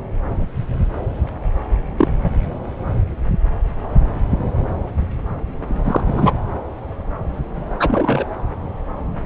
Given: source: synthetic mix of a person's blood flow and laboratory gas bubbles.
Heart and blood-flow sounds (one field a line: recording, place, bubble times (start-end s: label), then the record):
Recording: Doppler ultrasound of blood flow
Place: subclavian vein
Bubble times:
1.98-2.08 s: bubbles
2.23-2.30 s: bubbles
5.84-6.00 s: bubbles
6.08-6.32 s: bubbles
7.80-8.24 s: bubbles
From the record:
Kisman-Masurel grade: 123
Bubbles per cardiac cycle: 1 to 2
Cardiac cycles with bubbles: 10 to 50%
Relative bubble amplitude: loud (0.450 to 0.775)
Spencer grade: 2 (many but less than half of the cardiac periods contain bubble signals, singularly or in groups)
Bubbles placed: anywhere in the cardiac cycle